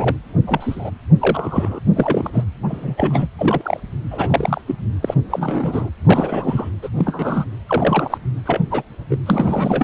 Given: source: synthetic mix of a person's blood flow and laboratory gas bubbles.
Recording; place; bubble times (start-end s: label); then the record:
Doppler ultrasound of blood flow; precordium
0.00-0.16 s: bubbles
0.46-0.91 s: bubbles
1.20-1.79 s: bubbles
1.96-2.31 s: bubbles
2.33-2.44 s: bubbles
2.63-3.28 s: bubbles
3.39-3.80 s: bubbles
4.11-4.61 s: bubbles
4.67-4.75 s: bubbles
5.01-5.15 s: bubbles
5.30-5.89 s: bubbles
6.05-6.70 s: bubbles
6.82-6.89 s: bubbles
6.96-7.45 s: bubbles
7.66-8.18 s: bubbles
8.45-8.61 s: bubbles
8.71-8.82 s: bubbles
9.10-9.17 s: bubbles
9.26-9.84 s: bubbles
From the record:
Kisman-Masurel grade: 242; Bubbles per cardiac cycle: several, 3 to 8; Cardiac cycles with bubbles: 100%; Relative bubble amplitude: moderate (0.250 to 0.450); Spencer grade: 3 (all of the cardiac periods contain showers or single bubble signals, but not dominating or overriding the cardiac motion signals); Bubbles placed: anywhere in the cardiac cycle